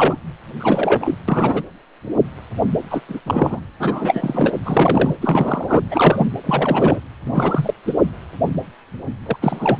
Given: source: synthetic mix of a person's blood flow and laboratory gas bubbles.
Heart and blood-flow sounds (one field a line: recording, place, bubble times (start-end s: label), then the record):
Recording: Doppler ultrasound of blood flow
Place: precordium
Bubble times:
0.00-0.18 s: bubbles
0.59-1.15 s: bubbles
1.28-1.64 s: bubbles
2.90-3.01 s: bubbles
3.08-3.21 s: bubbles
3.25-3.60 s: bubbles
3.79-4.50 s: bubbles
4.64-5.16 s: bubbles
5.21-5.80 s: bubbles
5.91-6.27 s: bubbles
6.43-7.00 s: bubbles
7.25-7.74 s: bubbles
7.87-7.93 s: bubbles
9.26-9.37 s: bubbles
9.40-9.80 s: bubbles
From the record:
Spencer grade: 3 (all of the cardiac periods contain showers or single bubble signals, but not dominating or overriding the cardiac motion signals)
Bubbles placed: anywhere in the cardiac cycle